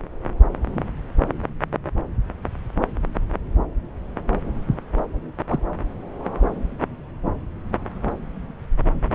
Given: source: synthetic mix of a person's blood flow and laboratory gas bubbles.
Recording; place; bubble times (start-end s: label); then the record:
Doppler ultrasound of blood flow; subclavian vein
5.49-5.60 s: bubbles
From the record:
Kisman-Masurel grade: 112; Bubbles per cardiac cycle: 1 to 2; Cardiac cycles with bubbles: 1 to 10%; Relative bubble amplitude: moderate (0.250 to 0.450); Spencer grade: 1 (occasional bubble signal discernible with the cardiac motion signal, with majority of cardiac periods free of bubbles); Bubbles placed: anywhere in the cardiac cycle